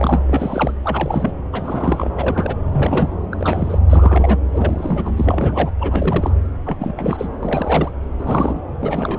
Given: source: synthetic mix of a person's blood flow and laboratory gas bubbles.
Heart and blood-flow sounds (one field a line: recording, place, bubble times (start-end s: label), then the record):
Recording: Doppler ultrasound of blood flow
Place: subclavian vein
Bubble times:
0.00-0.22 s: bubbles
0.27-0.72 s: bubbles
0.84-1.32 s: bubbles
1.52-2.10 s: bubbles
2.15-2.55 s: bubbles
2.72-3.17 s: bubbles
3.31-3.79 s: bubbles
3.89-4.37 s: bubbles
4.52-5.70 s: bubbles
5.79-6.32 s: bubbles
6.66-6.77 s: bubbles
6.79-7.29 s: bubbles
7.43-7.92 s: bubbles
8.17-8.62 s: bubbles
8.79-9.18 s: bubbles
From the record:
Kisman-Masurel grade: 342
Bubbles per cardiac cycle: rolling drumbeat, 9 or more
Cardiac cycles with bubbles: 100%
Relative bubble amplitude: moderate (0.250 to 0.450)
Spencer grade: 3 (all of the cardiac periods contain showers or single bubble signals, but not dominating or overriding the cardiac motion signals)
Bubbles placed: anywhere in the cardiac cycle